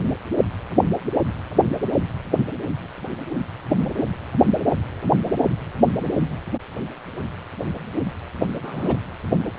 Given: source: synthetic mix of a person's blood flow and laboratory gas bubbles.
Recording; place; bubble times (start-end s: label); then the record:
Doppler ultrasound of blood flow; precordium
8.62-8.96 s: bubbles
From the record:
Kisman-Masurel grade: 211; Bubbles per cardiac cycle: several, 3 to 8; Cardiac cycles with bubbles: 1 to 10%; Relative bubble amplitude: barely perceptible (0.100 to 0.250); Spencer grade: 1 (occasional bubble signal discernible with the cardiac motion signal, with majority of cardiac periods free of bubbles); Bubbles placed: anywhere in the cardiac cycle